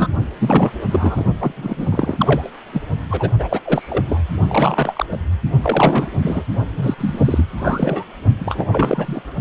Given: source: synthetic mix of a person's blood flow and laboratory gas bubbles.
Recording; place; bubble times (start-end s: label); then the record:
Doppler ultrasound of blood flow; precordium
0.00-0.08 s: bubbles
0.39-0.71 s: bubbles
0.91-1.25 s: bubbles
1.38-1.52 s: bubbles
1.56-2.49 s: bubbles
2.72-2.81 s: bubbles
3.10-3.31 s: bubbles
3.39-3.60 s: bubbles
3.65-4.21 s: bubbles
4.48-5.05 s: bubbles
5.12-5.18 s: bubbles
5.62-6.10 s: bubbles
6.22-6.42 s: bubbles
6.76-6.95 s: bubbles
6.98-7.46 s: bubbles
7.56-8.05 s: bubbles
8.40-9.21 s: bubbles
From the record:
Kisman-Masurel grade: 343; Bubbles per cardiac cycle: rolling drumbeat, 9 or more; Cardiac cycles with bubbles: 100%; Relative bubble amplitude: loud (0.450 to 0.775); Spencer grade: 3 (all of the cardiac periods contain showers or single bubble signals, but not dominating or overriding the cardiac motion signals); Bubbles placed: only in the low amplitude regions of the cardiac cycle